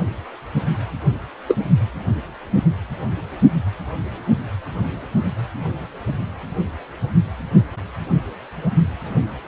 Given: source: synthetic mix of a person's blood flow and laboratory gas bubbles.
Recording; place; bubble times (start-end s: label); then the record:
Doppler ultrasound of blood flow; precordium
1.46-1.56 s: bubbles
From the record:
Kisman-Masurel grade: 113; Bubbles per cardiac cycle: 1 to 2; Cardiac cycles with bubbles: 1 to 10%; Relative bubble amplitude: loud (0.450 to 0.775); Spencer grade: 1 (occasional bubble signal discernible with the cardiac motion signal, with majority of cardiac periods free of bubbles); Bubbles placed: only in the low amplitude regions of the cardiac cycle